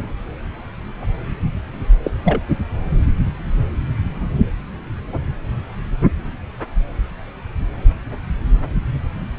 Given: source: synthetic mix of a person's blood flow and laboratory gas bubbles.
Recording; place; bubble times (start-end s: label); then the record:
Doppler ultrasound of blood flow; subclavian vein
2.04-2.11 s: bubbles
2.24-2.40 s: bubbles
From the record:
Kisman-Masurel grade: 212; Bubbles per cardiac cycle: several, 3 to 8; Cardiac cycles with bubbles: 1 to 10%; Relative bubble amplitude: moderate (0.250 to 0.450); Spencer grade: 1 (occasional bubble signal discernible with the cardiac motion signal, with majority of cardiac periods free of bubbles); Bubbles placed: anywhere in the cardiac cycle